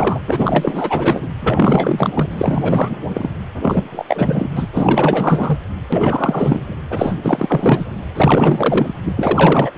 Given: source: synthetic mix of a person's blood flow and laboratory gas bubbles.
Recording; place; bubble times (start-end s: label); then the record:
Doppler ultrasound of blood flow; precordium
0.00-0.21 s: bubbles
0.27-1.27 s: bubbles
1.41-2.10 s: bubbles
2.13-3.04 s: bubbles
3.08-3.30 s: bubbles
3.61-3.82 s: bubbles
3.92-4.05 s: bubbles
4.08-4.49 s: bubbles
4.54-4.68 s: bubbles
4.75-5.58 s: bubbles
5.92-6.75 s: bubbles
6.89-7.14 s: bubbles
7.21-7.85 s: bubbles
8.15-8.95 s: bubbles
9.05-9.13 s: bubbles
9.16-9.71 s: bubbles
From the record:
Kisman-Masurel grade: 444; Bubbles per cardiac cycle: continuous sound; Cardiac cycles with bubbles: 100%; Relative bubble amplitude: maximal (0.775 to 0.999); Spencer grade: 4 (maximum detectable bubble signal sounding continuously throughout systole and diastole of every cardiac period, and overriding the amplitude of the normal cardiac signals); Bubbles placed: anywhere in the cardiac cycle